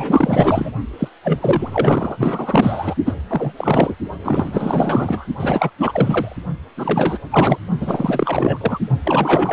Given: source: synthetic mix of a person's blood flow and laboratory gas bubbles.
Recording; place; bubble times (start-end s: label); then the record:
Doppler ultrasound of blood flow; precordium
0.00-0.71 s: bubbles
0.99-1.08 s: bubbles
1.24-2.96 s: bubbles
3.05-3.13 s: bubbles
3.29-3.52 s: bubbles
3.56-3.95 s: bubbles
4.22-5.26 s: bubbles
5.39-5.70 s: bubbles
5.77-6.36 s: bubbles
6.77-7.17 s: bubbles
7.31-7.58 s: bubbles
7.80-8.79 s: bubbles
9.03-9.52 s: bubbles
From the record:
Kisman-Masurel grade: 444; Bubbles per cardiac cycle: continuous sound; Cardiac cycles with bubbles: 100%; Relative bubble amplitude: maximal (0.775 to 0.999); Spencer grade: 4 (maximum detectable bubble signal sounding continuously throughout systole and diastole of every cardiac period, and overriding the amplitude of the normal cardiac signals); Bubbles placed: only in the low amplitude regions of the cardiac cycle